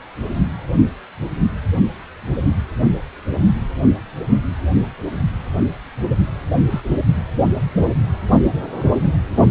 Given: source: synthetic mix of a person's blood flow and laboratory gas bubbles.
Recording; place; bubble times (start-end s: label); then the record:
Doppler ultrasound of blood flow; precordium
6.70-6.81 s: bubbles
From the record:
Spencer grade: 1 (occasional bubble signal discernible with the cardiac motion signal, with majority of cardiac periods free of bubbles); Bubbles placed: only in the low amplitude regions of the cardiac cycle